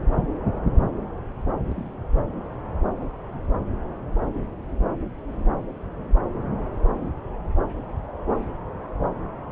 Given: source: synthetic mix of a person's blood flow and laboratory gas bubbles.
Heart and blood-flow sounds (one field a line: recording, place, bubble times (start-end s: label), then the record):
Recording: Doppler ultrasound of blood flow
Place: subclavian vein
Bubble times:
1.65-1.89 s: bubbles
From the record:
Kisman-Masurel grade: 111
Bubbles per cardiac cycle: 1 to 2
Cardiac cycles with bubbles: 1 to 10%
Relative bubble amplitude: barely perceptible (0.100 to 0.250)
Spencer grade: 1 (occasional bubble signal discernible with the cardiac motion signal, with majority of cardiac periods free of bubbles)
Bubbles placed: anywhere in the cardiac cycle